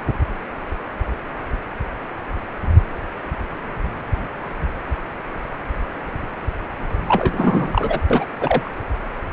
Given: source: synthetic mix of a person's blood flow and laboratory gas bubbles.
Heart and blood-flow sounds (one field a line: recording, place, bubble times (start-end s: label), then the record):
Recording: Doppler ultrasound of blood flow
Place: precordium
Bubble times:
7.08-8.00 s: bubbles
8.10-8.25 s: bubbles
8.40-8.71 s: bubbles
From the record:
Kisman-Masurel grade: 222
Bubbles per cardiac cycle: several, 3 to 8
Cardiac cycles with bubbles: 10 to 50%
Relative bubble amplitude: moderate (0.250 to 0.450)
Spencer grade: 2 (many but less than half of the cardiac periods contain bubble signals, singularly or in groups)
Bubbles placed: anywhere in the cardiac cycle